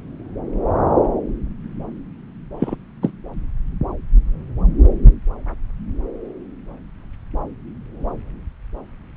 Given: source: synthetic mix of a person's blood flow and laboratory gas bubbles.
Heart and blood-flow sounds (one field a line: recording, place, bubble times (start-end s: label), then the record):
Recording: Doppler ultrasound of blood flow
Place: subclavian vein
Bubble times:
2.60-2.75 s: bubbles
3.02-3.10 s: bubbles
From the record:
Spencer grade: 1 (occasional bubble signal discernible with the cardiac motion signal, with majority of cardiac periods free of bubbles)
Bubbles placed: anywhere in the cardiac cycle